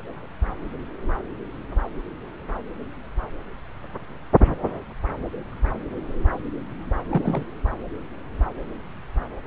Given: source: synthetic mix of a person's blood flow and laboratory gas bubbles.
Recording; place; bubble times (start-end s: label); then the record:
Doppler ultrasound of blood flow; subclavian vein
7.08-7.44 s: bubbles
From the record:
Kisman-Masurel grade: 112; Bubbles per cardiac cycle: 1 to 2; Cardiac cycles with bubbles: 1 to 10%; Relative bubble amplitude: moderate (0.250 to 0.450); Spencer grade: 1 (occasional bubble signal discernible with the cardiac motion signal, with majority of cardiac periods free of bubbles); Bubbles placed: anywhere in the cardiac cycle